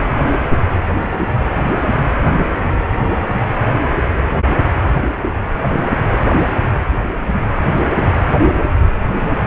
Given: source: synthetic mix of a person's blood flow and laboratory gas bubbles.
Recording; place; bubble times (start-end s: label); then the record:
Doppler ultrasound of blood flow; precordium
no bubbles
From the record:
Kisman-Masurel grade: 000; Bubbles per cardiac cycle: 0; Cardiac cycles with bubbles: 0%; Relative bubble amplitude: no bubbles discernible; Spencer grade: 0 (complete lack of bubble signals)